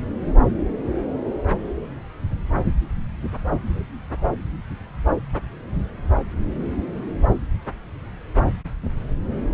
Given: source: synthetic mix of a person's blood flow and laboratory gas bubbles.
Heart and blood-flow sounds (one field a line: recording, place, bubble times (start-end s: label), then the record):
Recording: Doppler ultrasound of blood flow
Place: subclavian vein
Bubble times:
no bubbles
From the record:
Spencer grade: 0 (complete lack of bubble signals)